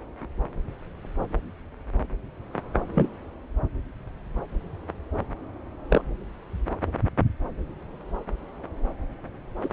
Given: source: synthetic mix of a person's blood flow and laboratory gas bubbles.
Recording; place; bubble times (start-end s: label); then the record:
Doppler ultrasound of blood flow; subclavian vein
2.95-3.09 s: bubbles
5.89-6.02 s: bubbles
9.62-9.69 s: bubbles
From the record:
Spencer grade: 2 (many but less than half of the cardiac periods contain bubble signals, singularly or in groups); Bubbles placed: anywhere in the cardiac cycle